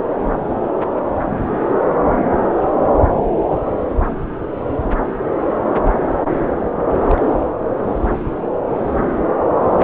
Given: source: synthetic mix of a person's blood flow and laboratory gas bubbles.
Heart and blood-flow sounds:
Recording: Doppler ultrasound of blood flow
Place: subclavian vein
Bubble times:
6.33-6.46 s: bubbles
6.56-7.20 s: bubbles
From the record:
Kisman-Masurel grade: 211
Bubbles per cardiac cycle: several, 3 to 8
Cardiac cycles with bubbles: 1 to 10%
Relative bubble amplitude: barely perceptible (0.100 to 0.250)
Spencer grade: 1 (occasional bubble signal discernible with the cardiac motion signal, with majority of cardiac periods free of bubbles)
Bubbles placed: anywhere in the cardiac cycle

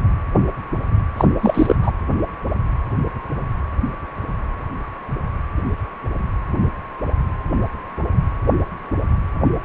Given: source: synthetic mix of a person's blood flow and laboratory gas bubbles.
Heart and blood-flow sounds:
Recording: Doppler ultrasound of blood flow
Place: precordium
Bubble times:
1.17-1.25 s: bubbles
1.43-1.76 s: bubbles
1.82-1.92 s: bubbles
From the record:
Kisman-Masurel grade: 213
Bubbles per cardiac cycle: several, 3 to 8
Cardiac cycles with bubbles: 1 to 10%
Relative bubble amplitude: loud (0.450 to 0.775)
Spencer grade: 1 (occasional bubble signal discernible with the cardiac motion signal, with majority of cardiac periods free of bubbles)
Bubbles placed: anywhere in the cardiac cycle

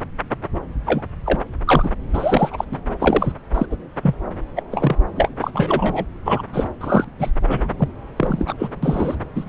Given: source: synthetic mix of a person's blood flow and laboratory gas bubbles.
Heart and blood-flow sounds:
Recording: Doppler ultrasound of blood flow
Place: subclavian vein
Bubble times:
0.85-1.02 s: bubbles
1.25-1.40 s: bubbles
1.67-1.90 s: bubbles
2.13-2.64 s: bubbles
2.71-2.78 s: bubbles
3.00-3.32 s: bubbles
3.54-3.66 s: bubbles
3.71-3.76 s: bubbles
4.03-4.15 s: bubbles
4.56-4.62 s: bubbles
4.71-4.96 s: bubbles
5.16-5.29 s: bubbles
5.41-5.50 s: bubbles
5.54-6.06 s: bubbles
6.25-6.42 s: bubbles
6.53-6.66 s: bubbles
6.81-7.04 s: bubbles
7.19-7.31 s: bubbles
7.47-7.71 s: bubbles
7.78-7.88 s: bubbles
8.16-8.54 s: bubbles
8.59-8.69 s: bubbles
8.83-9.15 s: bubbles
9.35-9.45 s: bubbles
From the record:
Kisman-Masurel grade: 243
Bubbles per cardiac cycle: several, 3 to 8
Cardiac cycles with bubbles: 100%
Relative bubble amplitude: loud (0.450 to 0.775)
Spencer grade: 3 (all of the cardiac periods contain showers or single bubble signals, but not dominating or overriding the cardiac motion signals)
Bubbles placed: anywhere in the cardiac cycle

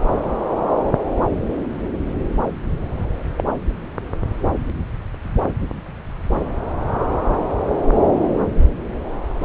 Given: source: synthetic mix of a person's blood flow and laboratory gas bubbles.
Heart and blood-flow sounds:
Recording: Doppler ultrasound of blood flow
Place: subclavian vein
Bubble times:
3.37-3.44 s: bubbles
From the record:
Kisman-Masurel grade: 113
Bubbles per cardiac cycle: 1 to 2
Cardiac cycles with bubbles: 1 to 10%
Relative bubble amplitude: loud (0.450 to 0.775)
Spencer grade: 1 (occasional bubble signal discernible with the cardiac motion signal, with majority of cardiac periods free of bubbles)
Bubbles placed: anywhere in the cardiac cycle

